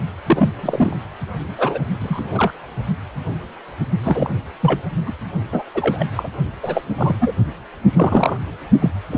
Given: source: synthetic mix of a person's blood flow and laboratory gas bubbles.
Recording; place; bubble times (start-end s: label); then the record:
Doppler ultrasound of blood flow; precordium
0.26-0.50 s: bubbles
0.60-0.97 s: bubbles
1.57-1.78 s: bubbles
1.99-2.54 s: bubbles
4.04-4.39 s: bubbles
4.60-4.83 s: bubbles
5.07-5.12 s: bubbles
5.52-5.63 s: bubbles
5.74-6.04 s: bubbles
6.16-6.29 s: bubbles
6.62-6.82 s: bubbles
6.98-7.16 s: bubbles
7.20-7.32 s: bubbles
7.93-8.37 s: bubbles
8.80-8.90 s: bubbles
9.11-9.18 s: bubbles
From the record:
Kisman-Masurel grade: 232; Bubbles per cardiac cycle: several, 3 to 8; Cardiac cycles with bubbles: 50 to 99%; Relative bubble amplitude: moderate (0.250 to 0.450); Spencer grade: 3 (all of the cardiac periods contain showers or single bubble signals, but not dominating or overriding the cardiac motion signals); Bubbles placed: only in the low amplitude regions of the cardiac cycle